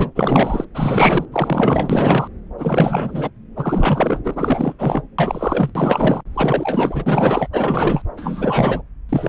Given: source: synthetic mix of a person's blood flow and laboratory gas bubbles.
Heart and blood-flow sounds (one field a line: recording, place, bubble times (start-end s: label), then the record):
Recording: Doppler ultrasound of blood flow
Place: subclavian vein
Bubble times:
0.00-0.10 s: bubbles
0.15-0.65 s: bubbles
0.75-1.25 s: bubbles
1.32-2.27 s: bubbles
2.58-3.31 s: bubbles
3.55-4.74 s: bubbles
4.79-5.03 s: bubbles
5.18-6.21 s: bubbles
6.33-7.49 s: bubbles
7.53-8.02 s: bubbles
8.17-8.82 s: bubbles
9.09-9.29 s: bubbles
From the record:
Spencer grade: 4 (maximum detectable bubble signal sounding continuously throughout systole and diastole of every cardiac period, and overriding the amplitude of the normal cardiac signals)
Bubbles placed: anywhere in the cardiac cycle